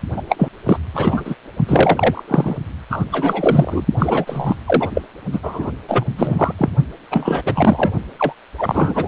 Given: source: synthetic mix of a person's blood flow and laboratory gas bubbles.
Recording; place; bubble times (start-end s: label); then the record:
Doppler ultrasound of blood flow; precordium
0.16-0.22 s: bubbles
0.28-0.49 s: bubbles
0.66-0.79 s: bubbles
0.94-1.35 s: bubbles
1.67-2.23 s: bubbles
2.27-2.56 s: bubbles
2.90-3.05 s: bubbles
3.12-3.85 s: bubbles
3.98-4.55 s: bubbles
4.66-4.88 s: bubbles
4.94-5.01 s: bubbles
5.32-5.39 s: bubbles
5.42-5.71 s: bubbles
5.88-6.06 s: bubbles
6.16-6.53 s: bubbles
6.58-6.70 s: bubbles
7.10-7.42 s: bubbles
7.45-7.93 s: bubbles
8.19-8.34 s: bubbles
8.58-9.08 s: bubbles
From the record:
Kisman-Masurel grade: 343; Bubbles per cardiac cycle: rolling drumbeat, 9 or more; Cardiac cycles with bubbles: 100%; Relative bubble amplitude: loud (0.450 to 0.775); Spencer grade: 3 (all of the cardiac periods contain showers or single bubble signals, but not dominating or overriding the cardiac motion signals); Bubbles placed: only in the low amplitude regions of the cardiac cycle